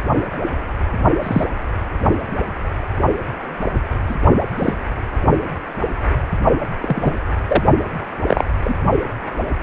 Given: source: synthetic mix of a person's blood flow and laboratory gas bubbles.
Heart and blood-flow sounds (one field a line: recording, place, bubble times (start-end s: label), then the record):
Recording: Doppler ultrasound of blood flow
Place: precordium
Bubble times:
1.23-1.45 s: bubbles
4.08-4.15 s: bubbles
4.58-4.74 s: bubbles
6.81-7.14 s: bubbles
7.48-7.64 s: bubbles
8.27-8.45 s: bubbles
8.64-8.75 s: bubbles
From the record:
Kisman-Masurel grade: 123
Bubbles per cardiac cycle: 1 to 2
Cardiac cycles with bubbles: 10 to 50%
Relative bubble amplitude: loud (0.450 to 0.775)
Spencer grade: 2 (many but less than half of the cardiac periods contain bubble signals, singularly or in groups)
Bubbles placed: only in the low amplitude regions of the cardiac cycle